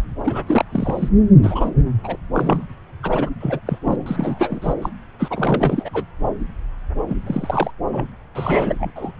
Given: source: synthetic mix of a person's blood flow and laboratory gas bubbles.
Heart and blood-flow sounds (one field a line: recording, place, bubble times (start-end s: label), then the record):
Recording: Doppler ultrasound of blood flow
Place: subclavian vein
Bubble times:
0.25-0.44 s: bubbles
0.47-0.65 s: bubbles
0.71-1.08 s: bubbles
1.42-1.72 s: bubbles
2.04-2.17 s: bubbles
2.33-2.68 s: bubbles
3.03-3.31 s: bubbles
3.41-3.60 s: bubbles
3.67-3.79 s: bubbles
3.84-3.96 s: bubbles
4.06-4.74 s: bubbles
4.82-4.90 s: bubbles
5.19-5.90 s: bubbles
5.93-6.04 s: bubbles
7.08-7.17 s: bubbles
7.26-7.71 s: bubbles
7.92-8.05 s: bubbles
8.35-8.74 s: bubbles
8.79-8.91 s: bubbles
8.96-9.11 s: bubbles
From the record:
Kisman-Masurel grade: 342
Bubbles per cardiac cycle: rolling drumbeat, 9 or more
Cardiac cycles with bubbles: 100%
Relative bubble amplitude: moderate (0.250 to 0.450)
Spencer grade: 3 (all of the cardiac periods contain showers or single bubble signals, but not dominating or overriding the cardiac motion signals)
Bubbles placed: anywhere in the cardiac cycle